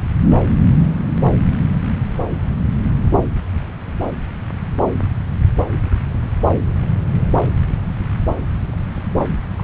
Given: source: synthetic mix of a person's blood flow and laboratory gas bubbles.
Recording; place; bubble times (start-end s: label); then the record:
Doppler ultrasound of blood flow; subclavian vein
9.15-9.38 s: bubbles
9.55-9.63 s: bubbles
From the record:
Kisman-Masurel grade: 121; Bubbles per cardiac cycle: 1 to 2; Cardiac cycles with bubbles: 10 to 50%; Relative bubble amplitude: barely perceptible (0.100 to 0.250); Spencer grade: 2 (many but less than half of the cardiac periods contain bubble signals, singularly or in groups); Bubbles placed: anywhere in the cardiac cycle